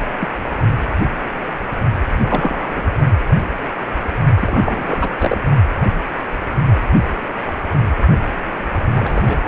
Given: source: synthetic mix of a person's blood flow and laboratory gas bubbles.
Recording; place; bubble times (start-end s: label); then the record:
Doppler ultrasound of blood flow; precordium
0.20-0.28 s: bubbles
2.12-2.84 s: bubbles
4.39-5.13 s: bubbles
5.19-5.37 s: bubbles
8.95-9.42 s: bubbles
From the record:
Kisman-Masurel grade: 232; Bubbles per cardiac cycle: several, 3 to 8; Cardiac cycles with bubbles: 50 to 99%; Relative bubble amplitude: moderate (0.250 to 0.450); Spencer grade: 3 (all of the cardiac periods contain showers or single bubble signals, but not dominating or overriding the cardiac motion signals); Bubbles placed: only in the low amplitude regions of the cardiac cycle